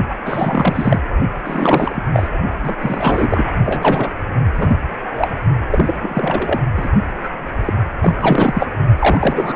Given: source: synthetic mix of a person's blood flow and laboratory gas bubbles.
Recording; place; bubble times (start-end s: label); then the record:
Doppler ultrasound of blood flow; precordium
0.10-0.14 s: bubbles
0.25-1.00 s: bubbles
1.44-2.03 s: bubbles
2.12-2.29 s: bubbles
2.62-2.75 s: bubbles
2.81-3.53 s: bubbles
3.66-4.11 s: bubbles
4.53-4.77 s: bubbles
5.04-5.34 s: bubbles
5.67-5.96 s: bubbles
6.01-6.61 s: bubbles
6.76-6.89 s: bubbles
7.23-7.29 s: bubbles
7.65-7.73 s: bubbles
8.02-8.67 s: bubbles
8.98-9.56 s: bubbles
From the record:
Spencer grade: 3 (all of the cardiac periods contain showers or single bubble signals, but not dominating or overriding the cardiac motion signals); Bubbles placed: only in the low amplitude regions of the cardiac cycle